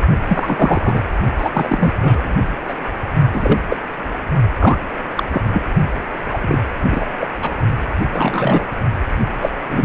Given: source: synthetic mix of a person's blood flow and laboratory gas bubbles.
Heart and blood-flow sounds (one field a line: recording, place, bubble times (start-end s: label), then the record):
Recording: Doppler ultrasound of blood flow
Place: precordium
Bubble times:
0.28-1.02 s: bubbles
1.38-1.49 s: bubbles
1.53-1.92 s: bubbles
2.01-2.44 s: bubbles
2.67-2.75 s: bubbles
3.33-3.58 s: bubbles
3.69-3.77 s: bubbles
4.60-4.79 s: bubbles
5.15-5.24 s: bubbles
5.32-5.41 s: bubbles
5.53-5.62 s: bubbles
6.30-6.57 s: bubbles
6.92-7.06 s: bubbles
7.17-7.27 s: bubbles
7.42-7.53 s: bubbles
8.12-8.67 s: bubbles
9.42-9.50 s: bubbles
9.69-9.85 s: bubbles
From the record:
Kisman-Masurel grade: 243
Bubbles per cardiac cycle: several, 3 to 8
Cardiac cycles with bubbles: 100%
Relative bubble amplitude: loud (0.450 to 0.775)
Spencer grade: 3 (all of the cardiac periods contain showers or single bubble signals, but not dominating or overriding the cardiac motion signals)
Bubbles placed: only in the low amplitude regions of the cardiac cycle